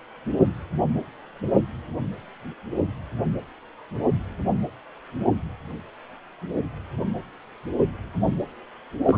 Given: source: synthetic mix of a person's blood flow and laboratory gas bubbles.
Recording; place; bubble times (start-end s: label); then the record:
Doppler ultrasound of blood flow; precordium
9.06-9.18 s: bubbles
From the record:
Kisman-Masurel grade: 212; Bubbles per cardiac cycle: several, 3 to 8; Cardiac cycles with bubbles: 1 to 10%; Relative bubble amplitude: moderate (0.250 to 0.450); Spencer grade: 1 (occasional bubble signal discernible with the cardiac motion signal, with majority of cardiac periods free of bubbles); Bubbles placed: anywhere in the cardiac cycle